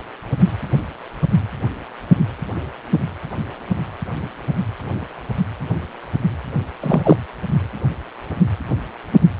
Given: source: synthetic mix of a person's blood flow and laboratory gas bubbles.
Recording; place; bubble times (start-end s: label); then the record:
Doppler ultrasound of blood flow; precordium
6.81-7.01 s: bubbles
7.04-7.17 s: bubbles
From the record:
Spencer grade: 1 (occasional bubble signal discernible with the cardiac motion signal, with majority of cardiac periods free of bubbles); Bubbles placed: anywhere in the cardiac cycle